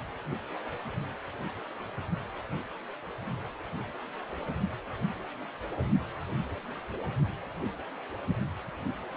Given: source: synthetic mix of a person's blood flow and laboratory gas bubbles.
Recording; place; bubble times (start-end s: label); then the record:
Doppler ultrasound of blood flow; precordium
no bubbles
From the record:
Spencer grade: 0 (complete lack of bubble signals)